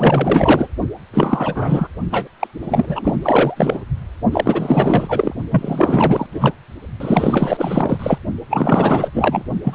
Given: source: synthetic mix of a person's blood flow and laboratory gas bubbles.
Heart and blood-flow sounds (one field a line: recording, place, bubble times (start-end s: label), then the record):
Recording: Doppler ultrasound of blood flow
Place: precordium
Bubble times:
0.00-0.68 s: bubbles
1.14-1.88 s: bubbles
2.10-2.28 s: bubbles
2.40-2.47 s: bubbles
2.62-3.17 s: bubbles
3.22-3.81 s: bubbles
4.31-5.34 s: bubbles
5.50-6.26 s: bubbles
6.32-6.53 s: bubbles
7.00-8.18 s: bubbles
8.49-9.10 s: bubbles
9.13-9.45 s: bubbles
9.63-9.75 s: bubbles
From the record:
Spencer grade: 4 (maximum detectable bubble signal sounding continuously throughout systole and diastole of every cardiac period, and overriding the amplitude of the normal cardiac signals)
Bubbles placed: only in the low amplitude regions of the cardiac cycle